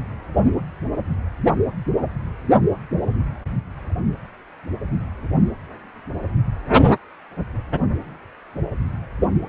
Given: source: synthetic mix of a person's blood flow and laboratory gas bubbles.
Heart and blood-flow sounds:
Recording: Doppler ultrasound of blood flow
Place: precordium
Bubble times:
no bubbles
From the record:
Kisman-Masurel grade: 000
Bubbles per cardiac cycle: 0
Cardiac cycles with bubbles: 0%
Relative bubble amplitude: no bubbles discernible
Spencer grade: 0 (complete lack of bubble signals)

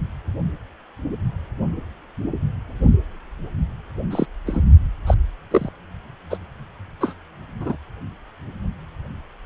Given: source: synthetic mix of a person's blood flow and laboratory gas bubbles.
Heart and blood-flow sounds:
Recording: Doppler ultrasound of blood flow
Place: precordium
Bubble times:
4.10-4.25 s: bubbles
4.46-4.62 s: bubbles
5.06-5.14 s: bubbles
5.50-5.69 s: bubbles
6.30-6.38 s: bubbles
7.00-7.14 s: bubbles
7.60-7.76 s: bubbles
From the record:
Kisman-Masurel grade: 122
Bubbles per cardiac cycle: 1 to 2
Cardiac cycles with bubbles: 10 to 50%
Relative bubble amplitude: moderate (0.250 to 0.450)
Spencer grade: 2 (many but less than half of the cardiac periods contain bubble signals, singularly or in groups)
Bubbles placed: only in the low amplitude regions of the cardiac cycle

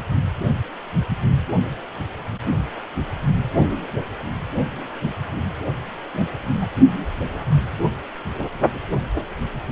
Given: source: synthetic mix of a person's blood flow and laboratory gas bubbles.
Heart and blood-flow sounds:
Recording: Doppler ultrasound of blood flow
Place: precordium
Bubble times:
6.13-6.26 s: bubbles
6.61-6.67 s: bubbles
From the record:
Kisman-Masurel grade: 211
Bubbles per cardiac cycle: several, 3 to 8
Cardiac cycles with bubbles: 1 to 10%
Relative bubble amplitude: barely perceptible (0.100 to 0.250)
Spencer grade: 1 (occasional bubble signal discernible with the cardiac motion signal, with majority of cardiac periods free of bubbles)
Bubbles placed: anywhere in the cardiac cycle

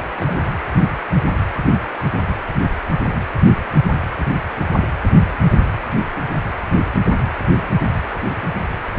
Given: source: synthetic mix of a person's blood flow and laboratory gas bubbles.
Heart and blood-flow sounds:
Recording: Doppler ultrasound of blood flow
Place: precordium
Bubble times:
0.00-0.09 s: bubbles
0.15-0.43 s: bubbles
From the record:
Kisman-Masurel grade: 211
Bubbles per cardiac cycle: several, 3 to 8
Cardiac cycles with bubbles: 1 to 10%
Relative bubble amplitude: barely perceptible (0.100 to 0.250)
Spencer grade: 1 (occasional bubble signal discernible with the cardiac motion signal, with majority of cardiac periods free of bubbles)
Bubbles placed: anywhere in the cardiac cycle

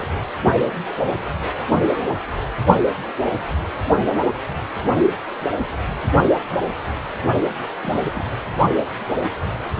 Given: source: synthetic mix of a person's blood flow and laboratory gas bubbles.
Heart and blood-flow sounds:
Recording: Doppler ultrasound of blood flow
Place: precordium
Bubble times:
0.00-0.07 s: bubbles
7.82-8.23 s: bubbles
From the record:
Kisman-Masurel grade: 121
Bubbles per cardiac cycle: 1 to 2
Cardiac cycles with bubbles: 10 to 50%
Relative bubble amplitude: barely perceptible (0.100 to 0.250)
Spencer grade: 2 (many but less than half of the cardiac periods contain bubble signals, singularly or in groups)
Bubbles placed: only in the low amplitude regions of the cardiac cycle

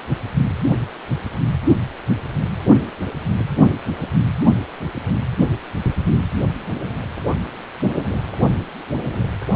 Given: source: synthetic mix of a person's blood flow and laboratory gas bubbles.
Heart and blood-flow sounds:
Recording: Doppler ultrasound of blood flow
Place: precordium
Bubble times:
no bubbles
From the record:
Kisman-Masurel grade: 000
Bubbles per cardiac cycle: 0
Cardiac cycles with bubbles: 0%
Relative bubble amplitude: no bubbles discernible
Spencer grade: 0 (complete lack of bubble signals)

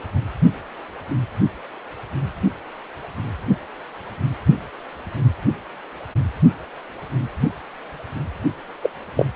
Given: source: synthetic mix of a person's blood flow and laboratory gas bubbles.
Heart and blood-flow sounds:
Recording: Doppler ultrasound of blood flow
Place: precordium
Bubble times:
8.83-8.90 s: bubbles
9.17-9.25 s: bubbles
From the record:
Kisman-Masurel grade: 123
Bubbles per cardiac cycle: 1 to 2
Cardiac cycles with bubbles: 10 to 50%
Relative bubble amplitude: loud (0.450 to 0.775)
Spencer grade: 2 (many but less than half of the cardiac periods contain bubble signals, singularly or in groups)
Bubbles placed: only in the low amplitude regions of the cardiac cycle

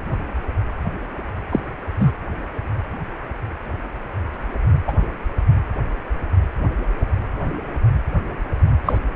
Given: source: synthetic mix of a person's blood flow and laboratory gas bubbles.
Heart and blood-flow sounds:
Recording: Doppler ultrasound of blood flow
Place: precordium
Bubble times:
1.50-1.60 s: bubbles
2.00-2.12 s: bubbles
4.87-4.92 s: bubbles
8.85-8.98 s: bubbles
From the record:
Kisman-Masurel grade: 123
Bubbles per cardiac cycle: 1 to 2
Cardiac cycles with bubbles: 10 to 50%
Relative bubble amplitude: loud (0.450 to 0.775)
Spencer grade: 2 (many but less than half of the cardiac periods contain bubble signals, singularly or in groups)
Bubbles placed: anywhere in the cardiac cycle

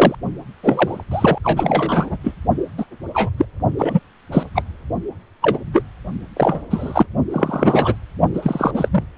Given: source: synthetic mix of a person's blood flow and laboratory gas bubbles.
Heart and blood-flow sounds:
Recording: Doppler ultrasound of blood flow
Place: precordium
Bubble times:
0.00-0.15 s: bubbles
0.63-1.04 s: bubbles
1.11-1.38 s: bubbles
1.44-2.17 s: bubbles
2.24-2.35 s: bubbles
2.77-2.85 s: bubbles
3.14-3.29 s: bubbles
3.38-3.46 s: bubbles
3.78-4.00 s: bubbles
4.31-4.46 s: bubbles
4.55-4.62 s: bubbles
5.42-5.59 s: bubbles
5.73-5.82 s: bubbles
6.36-6.62 s: bubbles
6.70-7.06 s: bubbles
7.30-7.95 s: bubbles
8.34-8.71 s: bubbles
8.74-9.04 s: bubbles
From the record:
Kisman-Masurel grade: 233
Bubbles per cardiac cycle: several, 3 to 8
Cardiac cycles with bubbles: 50 to 99%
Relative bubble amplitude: loud (0.450 to 0.775)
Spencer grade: 3 (all of the cardiac periods contain showers or single bubble signals, but not dominating or overriding the cardiac motion signals)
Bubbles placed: only in the low amplitude regions of the cardiac cycle

